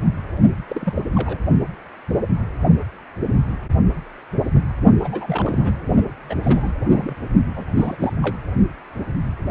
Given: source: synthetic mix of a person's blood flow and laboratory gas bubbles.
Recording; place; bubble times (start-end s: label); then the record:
Doppler ultrasound of blood flow; precordium
0.68-1.03 s: bubbles
1.14-1.38 s: bubbles
5.00-5.72 s: bubbles
6.29-6.35 s: bubbles
6.43-6.72 s: bubbles
6.93-7.15 s: bubbles
7.56-7.65 s: bubbles
7.75-8.13 s: bubbles
8.22-8.37 s: bubbles
From the record:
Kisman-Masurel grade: 221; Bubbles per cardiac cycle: several, 3 to 8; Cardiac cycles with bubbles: 10 to 50%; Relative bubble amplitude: barely perceptible (0.100 to 0.250); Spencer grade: 2 (many but less than half of the cardiac periods contain bubble signals, singularly or in groups); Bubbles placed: only in the low amplitude regions of the cardiac cycle